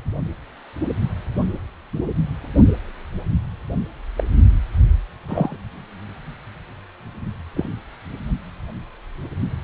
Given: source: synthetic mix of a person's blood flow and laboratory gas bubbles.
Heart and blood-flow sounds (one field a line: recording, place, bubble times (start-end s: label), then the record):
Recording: Doppler ultrasound of blood flow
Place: precordium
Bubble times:
4.17-4.24 s: bubbles
5.28-5.57 s: bubbles
7.56-7.69 s: bubbles
From the record:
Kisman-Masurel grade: 122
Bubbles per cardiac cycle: 1 to 2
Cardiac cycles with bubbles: 10 to 50%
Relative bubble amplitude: moderate (0.250 to 0.450)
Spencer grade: 2 (many but less than half of the cardiac periods contain bubble signals, singularly or in groups)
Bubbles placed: only in the low amplitude regions of the cardiac cycle